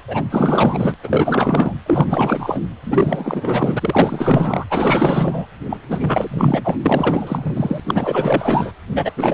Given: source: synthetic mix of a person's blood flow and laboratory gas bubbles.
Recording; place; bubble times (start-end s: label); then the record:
Doppler ultrasound of blood flow; precordium
0.08-0.23 s: bubbles
0.30-0.94 s: bubbles
1.03-1.74 s: bubbles
1.86-2.61 s: bubbles
2.83-4.65 s: bubbles
4.70-5.46 s: bubbles
5.69-5.78 s: bubbles
5.88-6.76 s: bubbles
6.85-7.80 s: bubbles
7.87-8.72 s: bubbles
8.96-9.12 s: bubbles
9.17-9.34 s: bubbles
From the record:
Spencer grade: 4 (maximum detectable bubble signal sounding continuously throughout systole and diastole of every cardiac period, and overriding the amplitude of the normal cardiac signals); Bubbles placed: anywhere in the cardiac cycle